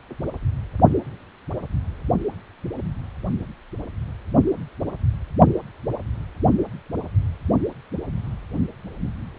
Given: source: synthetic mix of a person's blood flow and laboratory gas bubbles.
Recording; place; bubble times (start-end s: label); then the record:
Doppler ultrasound of blood flow; precordium
no bubbles
From the record:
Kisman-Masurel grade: 000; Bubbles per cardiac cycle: 0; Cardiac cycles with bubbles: 0%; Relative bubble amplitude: no bubbles discernible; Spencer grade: 0 (complete lack of bubble signals)